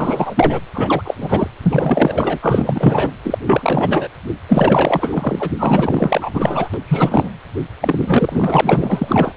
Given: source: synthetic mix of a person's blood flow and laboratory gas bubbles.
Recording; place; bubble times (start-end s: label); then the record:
Doppler ultrasound of blood flow; precordium
0.00-0.60 s: bubbles
0.74-1.14 s: bubbles
1.20-1.48 s: bubbles
1.62-2.38 s: bubbles
2.42-3.10 s: bubbles
3.23-3.38 s: bubbles
3.46-4.08 s: bubbles
4.48-5.51 s: bubbles
5.58-6.70 s: bubbles
6.74-6.78 s: bubbles
6.86-7.29 s: bubbles
7.81-9.33 s: bubbles
From the record:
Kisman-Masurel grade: 444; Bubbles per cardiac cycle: continuous sound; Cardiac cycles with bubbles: 100%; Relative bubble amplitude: maximal (0.775 to 0.999); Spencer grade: 4 (maximum detectable bubble signal sounding continuously throughout systole and diastole of every cardiac period, and overriding the amplitude of the normal cardiac signals); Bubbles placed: anywhere in the cardiac cycle